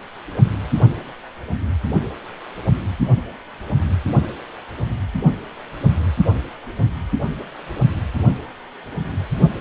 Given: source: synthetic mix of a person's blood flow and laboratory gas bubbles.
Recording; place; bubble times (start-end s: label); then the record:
Doppler ultrasound of blood flow; precordium
no bubbles
From the record:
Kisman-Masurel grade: 000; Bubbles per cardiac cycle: 0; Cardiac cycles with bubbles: 0%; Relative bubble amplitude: no bubbles discernible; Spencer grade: 0 (complete lack of bubble signals)